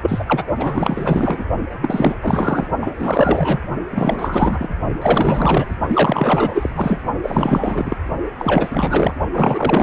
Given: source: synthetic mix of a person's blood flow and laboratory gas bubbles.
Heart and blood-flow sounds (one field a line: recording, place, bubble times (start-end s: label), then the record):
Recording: Doppler ultrasound of blood flow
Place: precordium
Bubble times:
0.01-0.43 s: bubbles
0.57-1.44 s: bubbles
1.81-2.15 s: bubbles
2.21-2.67 s: bubbles
2.81-2.92 s: bubbles
2.94-3.59 s: bubbles
3.90-4.69 s: bubbles
5.01-5.76 s: bubbles
5.88-7.02 s: bubbles
7.23-7.97 s: bubbles
8.38-9.14 s: bubbles
9.32-9.82 s: bubbles
From the record:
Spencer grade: 4 (maximum detectable bubble signal sounding continuously throughout systole and diastole of every cardiac period, and overriding the amplitude of the normal cardiac signals)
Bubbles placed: only in the low amplitude regions of the cardiac cycle